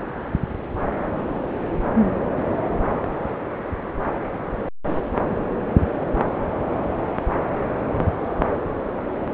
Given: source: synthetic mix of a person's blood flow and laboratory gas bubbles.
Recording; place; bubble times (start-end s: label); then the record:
Doppler ultrasound of blood flow; subclavian vein
5.69-5.73 s: bubbles
From the record:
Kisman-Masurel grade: 121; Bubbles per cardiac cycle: 1 to 2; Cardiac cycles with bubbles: 10 to 50%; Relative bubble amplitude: barely perceptible (0.100 to 0.250); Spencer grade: 2 (many but less than half of the cardiac periods contain bubble signals, singularly or in groups); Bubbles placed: anywhere in the cardiac cycle